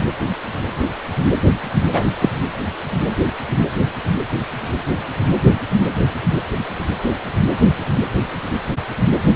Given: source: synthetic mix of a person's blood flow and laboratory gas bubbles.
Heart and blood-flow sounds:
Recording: Doppler ultrasound of blood flow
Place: precordium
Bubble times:
1.92-2.02 s: bubbles
2.19-2.29 s: bubbles
From the record:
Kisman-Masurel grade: 113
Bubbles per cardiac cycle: 1 to 2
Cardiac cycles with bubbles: 1 to 10%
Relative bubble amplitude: loud (0.450 to 0.775)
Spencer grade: 1 (occasional bubble signal discernible with the cardiac motion signal, with majority of cardiac periods free of bubbles)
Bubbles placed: anywhere in the cardiac cycle

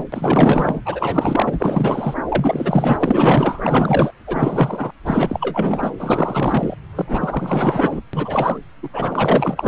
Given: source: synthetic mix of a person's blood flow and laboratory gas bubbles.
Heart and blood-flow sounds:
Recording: Doppler ultrasound of blood flow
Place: subclavian vein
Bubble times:
0.00-0.03 s: bubbles
0.12-0.81 s: bubbles
0.85-2.14 s: bubbles
2.29-4.11 s: bubbles
4.26-4.90 s: bubbles
5.06-5.92 s: bubbles
5.98-6.75 s: bubbles
6.95-8.01 s: bubbles
8.13-8.58 s: bubbles
8.83-8.88 s: bubbles
8.93-9.68 s: bubbles
From the record:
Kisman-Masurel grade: 444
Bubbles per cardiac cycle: continuous sound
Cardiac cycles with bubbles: 100%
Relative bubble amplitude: maximal (0.775 to 0.999)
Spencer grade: 4 (maximum detectable bubble signal sounding continuously throughout systole and diastole of every cardiac period, and overriding the amplitude of the normal cardiac signals)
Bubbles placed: anywhere in the cardiac cycle

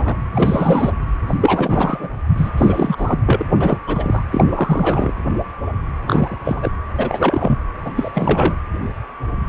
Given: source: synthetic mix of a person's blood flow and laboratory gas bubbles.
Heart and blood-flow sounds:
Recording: Doppler ultrasound of blood flow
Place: precordium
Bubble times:
0.00-0.16 s: bubbles
0.33-0.92 s: bubbles
1.27-1.38 s: bubbles
1.41-2.08 s: bubbles
2.37-2.50 s: bubbles
2.57-3.20 s: bubbles
3.25-3.44 s: bubbles
3.60-3.79 s: bubbles
3.86-4.24 s: bubbles
4.31-4.44 s: bubbles
4.48-5.13 s: bubbles
6.07-6.38 s: bubbles
6.44-6.71 s: bubbles
6.97-7.57 s: bubbles
7.85-7.92 s: bubbles
7.96-8.55 s: bubbles
From the record:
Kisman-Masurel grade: 333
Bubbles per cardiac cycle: rolling drumbeat, 9 or more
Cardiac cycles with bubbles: 50 to 99%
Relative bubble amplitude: loud (0.450 to 0.775)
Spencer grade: 3 (all of the cardiac periods contain showers or single bubble signals, but not dominating or overriding the cardiac motion signals)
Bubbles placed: anywhere in the cardiac cycle

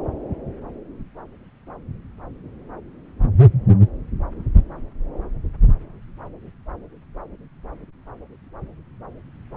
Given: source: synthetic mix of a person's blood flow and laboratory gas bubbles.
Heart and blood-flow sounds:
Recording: Doppler ultrasound of blood flow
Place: subclavian vein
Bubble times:
no bubbles
From the record:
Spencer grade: 0 (complete lack of bubble signals)

